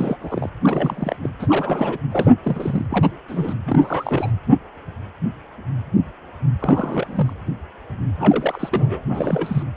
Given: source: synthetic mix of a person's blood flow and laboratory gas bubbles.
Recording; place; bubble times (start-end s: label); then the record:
Doppler ultrasound of blood flow; precordium
0.00-0.17 s: bubbles
0.21-0.50 s: bubbles
0.64-1.16 s: bubbles
1.23-1.29 s: bubbles
1.39-1.98 s: bubbles
2.11-2.31 s: bubbles
2.44-2.85 s: bubbles
2.89-3.10 s: bubbles
3.28-3.54 s: bubbles
3.65-4.31 s: bubbles
6.59-7.33 s: bubbles
8.19-9.02 s: bubbles
9.09-9.63 s: bubbles
From the record:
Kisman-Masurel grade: 332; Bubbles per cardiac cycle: rolling drumbeat, 9 or more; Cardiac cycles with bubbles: 50 to 99%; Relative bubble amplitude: moderate (0.250 to 0.450); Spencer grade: 3 (all of the cardiac periods contain showers or single bubble signals, but not dominating or overriding the cardiac motion signals); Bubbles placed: anywhere in the cardiac cycle